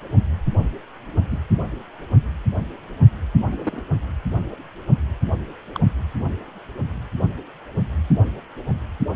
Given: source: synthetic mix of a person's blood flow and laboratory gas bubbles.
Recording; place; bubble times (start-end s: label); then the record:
Doppler ultrasound of blood flow; precordium
1.31-1.38 s: bubbles
3.46-3.83 s: bubbles
5.74-5.79 s: bubbles
From the record:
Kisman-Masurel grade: 121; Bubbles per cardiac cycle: 1 to 2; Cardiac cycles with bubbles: 10 to 50%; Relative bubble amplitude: barely perceptible (0.100 to 0.250); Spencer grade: 2 (many but less than half of the cardiac periods contain bubble signals, singularly or in groups); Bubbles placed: anywhere in the cardiac cycle